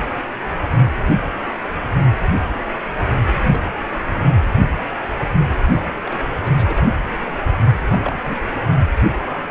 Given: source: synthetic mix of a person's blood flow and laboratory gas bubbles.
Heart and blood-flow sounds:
Doppler ultrasound of blood flow; precordium
3.46-3.71 s: bubbles
3.96-4.25 s: bubbles
6.04-6.21 s: bubbles
6.40-6.85 s: bubbles
7.25-7.32 s: bubbles
7.88-8.37 s: bubbles
From the record:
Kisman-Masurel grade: 221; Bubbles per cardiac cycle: several, 3 to 8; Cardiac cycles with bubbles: 10 to 50%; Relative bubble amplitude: barely perceptible (0.100 to 0.250); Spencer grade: 2 (many but less than half of the cardiac periods contain bubble signals, singularly or in groups); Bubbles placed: only in the low amplitude regions of the cardiac cycle

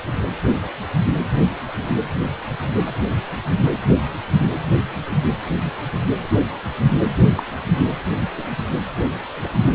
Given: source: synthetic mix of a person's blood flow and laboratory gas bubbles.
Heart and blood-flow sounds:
Doppler ultrasound of blood flow; precordium
7.37-7.43 s: bubbles
From the record:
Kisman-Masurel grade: 112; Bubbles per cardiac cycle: 1 to 2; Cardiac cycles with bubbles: 1 to 10%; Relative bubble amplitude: moderate (0.250 to 0.450); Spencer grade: 1 (occasional bubble signal discernible with the cardiac motion signal, with majority of cardiac periods free of bubbles); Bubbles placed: anywhere in the cardiac cycle

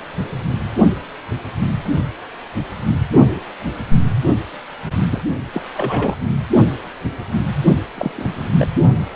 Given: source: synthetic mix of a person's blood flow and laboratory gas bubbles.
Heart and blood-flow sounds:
Doppler ultrasound of blood flow; precordium
5.10-5.22 s: bubbles
5.53-5.63 s: bubbles
5.76-6.15 s: bubbles
7.96-8.52 s: bubbles
8.59-8.67 s: bubbles
From the record:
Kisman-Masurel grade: 222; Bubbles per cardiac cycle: several, 3 to 8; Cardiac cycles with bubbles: 10 to 50%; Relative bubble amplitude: moderate (0.250 to 0.450); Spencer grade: 2 (many but less than half of the cardiac periods contain bubble signals, singularly or in groups); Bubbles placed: only in the low amplitude regions of the cardiac cycle

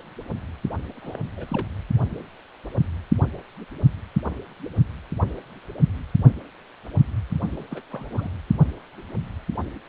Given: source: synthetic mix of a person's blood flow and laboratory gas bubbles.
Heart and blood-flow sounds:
Doppler ultrasound of blood flow; precordium
1.02-1.20 s: bubbles
1.36-1.66 s: bubbles
7.52-7.66 s: bubbles
7.71-7.82 s: bubbles
7.90-8.29 s: bubbles
From the record:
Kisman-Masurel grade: 221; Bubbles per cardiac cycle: several, 3 to 8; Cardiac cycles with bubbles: 10 to 50%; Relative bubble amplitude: barely perceptible (0.100 to 0.250); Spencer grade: 2 (many but less than half of the cardiac periods contain bubble signals, singularly or in groups); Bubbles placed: only in the low amplitude regions of the cardiac cycle

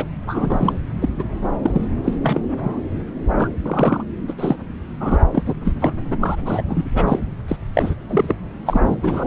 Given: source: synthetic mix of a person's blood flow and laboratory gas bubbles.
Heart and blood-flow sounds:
Doppler ultrasound of blood flow; subclavian vein
0.00-0.05 s: bubbles
0.26-0.79 s: bubbles
1.02-1.09 s: bubbles
1.19-1.25 s: bubbles
1.63-1.86 s: bubbles
2.04-2.13 s: bubbles
2.23-2.40 s: bubbles
2.60-2.81 s: bubbles
3.37-3.50 s: bubbles
3.65-4.04 s: bubbles
4.28-4.35 s: bubbles
4.38-4.56 s: bubbles
5.00-5.18 s: bubbles
5.33-5.54 s: bubbles
5.64-5.73 s: bubbles
5.81-5.93 s: bubbles
6.11-6.17 s: bubbles
6.20-6.36 s: bubbles
6.45-6.63 s: bubbles
6.68-6.90 s: bubbles
6.95-7.19 s: bubbles
7.48-7.57 s: bubbles
7.74-7.94 s: bubbles
8.08-8.35 s: bubbles
8.66-8.80 s: bubbles
8.85-8.96 s: bubbles
9.02-9.27 s: bubbles
From the record:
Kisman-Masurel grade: 243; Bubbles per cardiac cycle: several, 3 to 8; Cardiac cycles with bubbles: 100%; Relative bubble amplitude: loud (0.450 to 0.775); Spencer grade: 3 (all of the cardiac periods contain showers or single bubble signals, but not dominating or overriding the cardiac motion signals); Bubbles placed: anywhere in the cardiac cycle

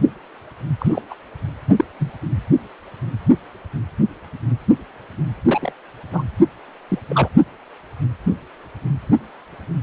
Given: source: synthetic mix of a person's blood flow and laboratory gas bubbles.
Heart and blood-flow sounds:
Doppler ultrasound of blood flow; precordium
0.79-1.01 s: bubbles
1.10-1.15 s: bubbles
1.77-1.85 s: bubbles
2.00-2.12 s: bubbles
5.47-5.72 s: bubbles
6.13-6.23 s: bubbles
6.88-6.98 s: bubbles
7.09-7.29 s: bubbles
From the record:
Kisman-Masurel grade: 122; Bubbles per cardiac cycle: 1 to 2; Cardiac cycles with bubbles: 10 to 50%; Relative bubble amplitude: moderate (0.250 to 0.450); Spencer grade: 2 (many but less than half of the cardiac periods contain bubble signals, singularly or in groups); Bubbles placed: anywhere in the cardiac cycle

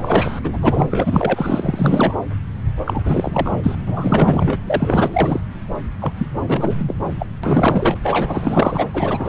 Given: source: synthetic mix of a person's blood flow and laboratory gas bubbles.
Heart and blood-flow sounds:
Doppler ultrasound of blood flow; subclavian vein
0.00-0.40 s: bubbles
0.43-0.57 s: bubbles
0.61-2.15 s: bubbles
2.84-3.76 s: bubbles
3.87-4.58 s: bubbles
4.66-5.42 s: bubbles
6.00-6.12 s: bubbles
6.17-6.26 s: bubbles
6.47-6.75 s: bubbles
6.79-6.95 s: bubbles
7.19-7.26 s: bubbles
7.43-7.98 s: bubbles
8.04-8.87 s: bubbles
8.94-9.29 s: bubbles
From the record:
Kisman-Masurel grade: 444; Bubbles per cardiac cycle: continuous sound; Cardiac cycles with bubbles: 100%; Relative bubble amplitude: maximal (0.775 to 0.999); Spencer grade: 4 (maximum detectable bubble signal sounding continuously throughout systole and diastole of every cardiac period, and overriding the amplitude of the normal cardiac signals); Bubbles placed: anywhere in the cardiac cycle

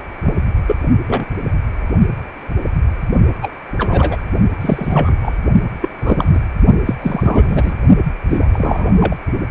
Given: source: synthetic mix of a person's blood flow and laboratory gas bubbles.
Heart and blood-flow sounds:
Doppler ultrasound of blood flow; precordium
0.23-0.34 s: bubbles
0.67-0.76 s: bubbles
1.07-1.25 s: bubbles
3.42-3.52 s: bubbles
3.77-4.22 s: bubbles
4.60-5.16 s: bubbles
5.21-5.38 s: bubbles
5.81-5.89 s: bubbles
5.98-6.42 s: bubbles
6.85-6.94 s: bubbles
7.01-7.74 s: bubbles
8.29-8.47 s: bubbles
8.51-9.15 s: bubbles
From the record:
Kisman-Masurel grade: 233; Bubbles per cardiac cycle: several, 3 to 8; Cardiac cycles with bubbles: 50 to 99%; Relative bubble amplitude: loud (0.450 to 0.775); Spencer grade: 3 (all of the cardiac periods contain showers or single bubble signals, but not dominating or overriding the cardiac motion signals); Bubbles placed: only in the low amplitude regions of the cardiac cycle

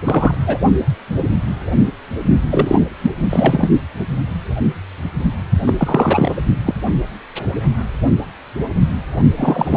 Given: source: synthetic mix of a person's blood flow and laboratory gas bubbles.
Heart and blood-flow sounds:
Doppler ultrasound of blood flow; precordium
0.04-0.34 s: bubbles
0.46-0.58 s: bubbles
2.51-2.79 s: bubbles
3.02-3.10 s: bubbles
3.29-3.69 s: bubbles
5.67-5.74 s: bubbles
5.77-6.35 s: bubbles
6.49-6.54 s: bubbles
6.67-6.74 s: bubbles
9.36-9.77 s: bubbles
From the record:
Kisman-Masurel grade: 333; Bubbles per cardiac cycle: rolling drumbeat, 9 or more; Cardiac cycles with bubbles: 50 to 99%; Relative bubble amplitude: loud (0.450 to 0.775); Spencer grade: 3 (all of the cardiac periods contain showers or single bubble signals, but not dominating or overriding the cardiac motion signals); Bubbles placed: only in the low amplitude regions of the cardiac cycle

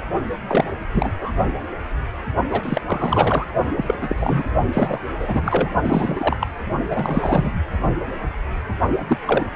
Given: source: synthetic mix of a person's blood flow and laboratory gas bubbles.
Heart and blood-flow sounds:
Doppler ultrasound of blood flow; precordium
0.48-0.64 s: bubbles
0.93-1.10 s: bubbles
1.19-1.31 s: bubbles
2.49-2.81 s: bubbles
2.86-3.46 s: bubbles
3.76-4.43 s: bubbles
4.72-5.00 s: bubbles
5.20-5.70 s: bubbles
5.84-6.37 s: bubbles
6.40-6.47 s: bubbles
6.89-7.51 s: bubbles
9.09-9.18 s: bubbles
9.26-9.47 s: bubbles
From the record:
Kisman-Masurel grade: 333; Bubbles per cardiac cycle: rolling drumbeat, 9 or more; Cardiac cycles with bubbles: 50 to 99%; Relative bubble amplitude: loud (0.450 to 0.775); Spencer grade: 3 (all of the cardiac periods contain showers or single bubble signals, but not dominating or overriding the cardiac motion signals); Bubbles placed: only in the low amplitude regions of the cardiac cycle

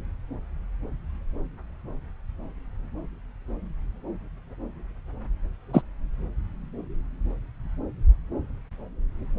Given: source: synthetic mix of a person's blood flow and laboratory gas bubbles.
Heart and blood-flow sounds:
Doppler ultrasound of blood flow; subclavian vein
5.73-5.82 s: bubbles
From the record:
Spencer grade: 1 (occasional bubble signal discernible with the cardiac motion signal, with majority of cardiac periods free of bubbles); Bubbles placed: anywhere in the cardiac cycle

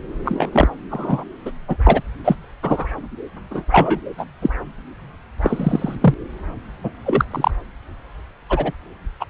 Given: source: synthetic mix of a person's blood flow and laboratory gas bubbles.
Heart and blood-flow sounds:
Doppler ultrasound of blood flow; subclavian vein
0.25-0.68 s: bubbles
0.90-1.24 s: bubbles
1.45-1.51 s: bubbles
1.68-1.77 s: bubbles
1.86-2.02 s: bubbles
2.24-2.35 s: bubbles
2.62-2.85 s: bubbles
3.50-3.65 s: bubbles
3.71-3.99 s: bubbles
4.17-4.25 s: bubbles
4.42-4.50 s: bubbles
5.42-5.96 s: bubbles
6.00-6.14 s: bubbles
6.83-6.91 s: bubbles
7.05-7.25 s: bubbles
7.31-7.51 s: bubbles
8.49-8.72 s: bubbles
9.20-9.25 s: bubbles
From the record:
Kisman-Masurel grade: 243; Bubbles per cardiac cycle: several, 3 to 8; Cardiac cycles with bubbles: 100%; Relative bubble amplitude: loud (0.450 to 0.775); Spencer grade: 3 (all of the cardiac periods contain showers or single bubble signals, but not dominating or overriding the cardiac motion signals); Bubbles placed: anywhere in the cardiac cycle

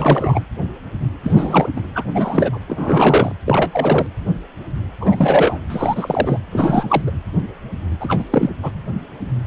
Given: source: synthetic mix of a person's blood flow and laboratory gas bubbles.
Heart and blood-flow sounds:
Doppler ultrasound of blood flow; precordium
0.00-0.42 s: bubbles
1.24-1.69 s: bubbles
1.76-1.81 s: bubbles
1.94-2.04 s: bubbles
2.14-2.58 s: bubbles
2.68-3.32 s: bubbles
3.46-4.06 s: bubbles
5.00-5.58 s: bubbles
5.69-6.38 s: bubbles
6.50-7.01 s: bubbles
7.06-7.10 s: bubbles
8.00-8.24 s: bubbles
8.31-8.50 s: bubbles
8.62-8.71 s: bubbles
From the record:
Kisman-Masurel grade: 333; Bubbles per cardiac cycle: rolling drumbeat, 9 or more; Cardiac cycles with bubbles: 50 to 99%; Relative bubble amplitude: loud (0.450 to 0.775); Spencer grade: 3 (all of the cardiac periods contain showers or single bubble signals, but not dominating or overriding the cardiac motion signals); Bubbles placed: anywhere in the cardiac cycle

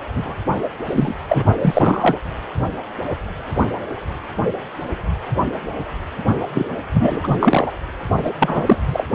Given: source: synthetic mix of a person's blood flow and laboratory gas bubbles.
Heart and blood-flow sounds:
Doppler ultrasound of blood flow; precordium
0.14-0.35 s: bubbles
0.88-1.14 s: bubbles
1.29-1.44 s: bubbles
1.61-2.17 s: bubbles
6.54-6.70 s: bubbles
6.93-7.21 s: bubbles
7.23-7.72 s: bubbles
8.25-8.31 s: bubbles
8.39-8.76 s: bubbles
8.88-9.06 s: bubbles
From the record:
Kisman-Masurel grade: 223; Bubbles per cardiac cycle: several, 3 to 8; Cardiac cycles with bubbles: 10 to 50%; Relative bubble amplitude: loud (0.450 to 0.775); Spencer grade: 2 (many but less than half of the cardiac periods contain bubble signals, singularly or in groups); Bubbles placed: only in the low amplitude regions of the cardiac cycle

